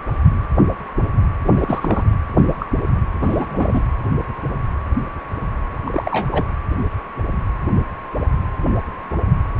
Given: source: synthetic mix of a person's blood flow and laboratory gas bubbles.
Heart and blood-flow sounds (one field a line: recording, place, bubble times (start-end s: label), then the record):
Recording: Doppler ultrasound of blood flow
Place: precordium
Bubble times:
1.44-2.04 s: bubbles
2.38-2.67 s: bubbles
2.81-2.87 s: bubbles
3.22-3.82 s: bubbles
5.84-6.53 s: bubbles
From the record:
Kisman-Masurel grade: 222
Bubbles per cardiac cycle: several, 3 to 8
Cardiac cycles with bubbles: 10 to 50%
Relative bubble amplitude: moderate (0.250 to 0.450)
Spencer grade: 2 (many but less than half of the cardiac periods contain bubble signals, singularly or in groups)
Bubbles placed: anywhere in the cardiac cycle